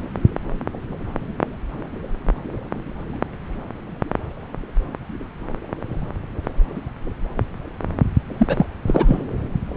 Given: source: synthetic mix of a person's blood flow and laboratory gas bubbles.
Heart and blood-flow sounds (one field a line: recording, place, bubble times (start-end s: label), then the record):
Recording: Doppler ultrasound of blood flow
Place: subclavian vein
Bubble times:
8.38-8.66 s: bubbles
8.87-9.25 s: bubbles
From the record:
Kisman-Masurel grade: 213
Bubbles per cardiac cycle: several, 3 to 8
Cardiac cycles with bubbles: 1 to 10%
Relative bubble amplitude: loud (0.450 to 0.775)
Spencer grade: 1 (occasional bubble signal discernible with the cardiac motion signal, with majority of cardiac periods free of bubbles)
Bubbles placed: anywhere in the cardiac cycle